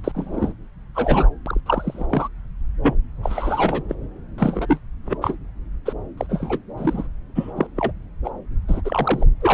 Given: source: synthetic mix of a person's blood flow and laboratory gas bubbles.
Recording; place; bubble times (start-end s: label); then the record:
Doppler ultrasound of blood flow; subclavian vein
0.04-0.12 s: bubbles
0.14-0.53 s: bubbles
0.94-1.30 s: bubbles
1.46-1.60 s: bubbles
1.66-2.06 s: bubbles
2.09-2.28 s: bubbles
2.83-2.95 s: bubbles
3.23-3.83 s: bubbles
3.89-3.95 s: bubbles
4.38-4.80 s: bubbles
5.06-5.17 s: bubbles
5.21-5.37 s: bubbles
5.85-5.93 s: bubbles
6.17-6.27 s: bubbles
6.29-6.58 s: bubbles
6.77-7.08 s: bubbles
7.35-7.53 s: bubbles
7.56-7.67 s: bubbles
7.75-7.92 s: bubbles
8.24-8.30 s: bubbles
8.68-8.81 s: bubbles
8.85-9.26 s: bubbles
9.40-9.54 s: bubbles
From the record:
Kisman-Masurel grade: 242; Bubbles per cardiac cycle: several, 3 to 8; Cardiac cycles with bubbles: 100%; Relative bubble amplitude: moderate (0.250 to 0.450); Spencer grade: 3 (all of the cardiac periods contain showers or single bubble signals, but not dominating or overriding the cardiac motion signals); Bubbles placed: anywhere in the cardiac cycle